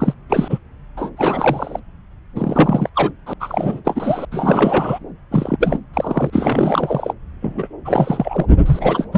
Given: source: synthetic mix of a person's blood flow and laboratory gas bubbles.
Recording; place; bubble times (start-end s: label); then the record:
Doppler ultrasound of blood flow; subclavian vein
0.00-0.14 s: bubbles
0.29-0.58 s: bubbles
0.96-1.10 s: bubbles
1.17-1.79 s: bubbles
2.35-2.90 s: bubbles
2.95-3.11 s: bubbles
3.26-3.33 s: bubbles
3.40-3.80 s: bubbles
3.85-4.25 s: bubbles
4.32-4.99 s: bubbles
5.31-5.57 s: bubbles
5.60-5.80 s: bubbles
5.94-7.14 s: bubbles
7.42-7.67 s: bubbles
7.84-8.46 s: bubbles
8.65-9.07 s: bubbles
9.12-9.18 s: bubbles
From the record:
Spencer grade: 3 (all of the cardiac periods contain showers or single bubble signals, but not dominating or overriding the cardiac motion signals); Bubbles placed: anywhere in the cardiac cycle